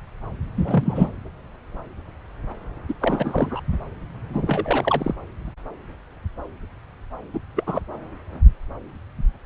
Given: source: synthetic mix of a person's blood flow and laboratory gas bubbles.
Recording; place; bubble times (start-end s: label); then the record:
Doppler ultrasound of blood flow; subclavian vein
0.57-1.09 s: bubbles
2.88-2.94 s: bubbles
3.01-3.60 s: bubbles
4.29-4.43 s: bubbles
4.47-5.15 s: bubbles
7.33-7.40 s: bubbles
7.56-7.64 s: bubbles
7.67-7.82 s: bubbles
From the record:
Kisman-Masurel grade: 222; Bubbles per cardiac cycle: several, 3 to 8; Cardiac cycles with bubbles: 10 to 50%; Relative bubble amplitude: moderate (0.250 to 0.450); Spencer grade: 2 (many but less than half of the cardiac periods contain bubble signals, singularly or in groups); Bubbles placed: anywhere in the cardiac cycle